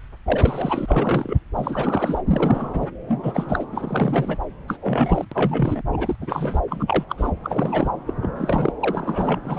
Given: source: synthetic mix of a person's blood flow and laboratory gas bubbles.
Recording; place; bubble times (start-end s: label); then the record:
Doppler ultrasound of blood flow; subclavian vein
0.26-1.40 s: bubbles
1.55-2.21 s: bubbles
2.27-2.87 s: bubbles
3.08-3.65 s: bubbles
3.71-4.37 s: bubbles
4.68-4.77 s: bubbles
4.82-5.25 s: bubbles
5.32-5.82 s: bubbles
5.93-6.16 s: bubbles
6.22-6.62 s: bubbles
6.70-7.04 s: bubbles
7.09-7.33 s: bubbles
7.44-7.90 s: bubbles
8.06-8.14 s: bubbles
8.22-8.29 s: bubbles
8.36-8.73 s: bubbles
8.79-9.40 s: bubbles
9.44-9.58 s: bubbles
From the record:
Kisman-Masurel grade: 342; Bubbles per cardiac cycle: rolling drumbeat, 9 or more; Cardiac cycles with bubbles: 100%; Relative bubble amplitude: moderate (0.250 to 0.450); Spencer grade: 3 (all of the cardiac periods contain showers or single bubble signals, but not dominating or overriding the cardiac motion signals); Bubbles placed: anywhere in the cardiac cycle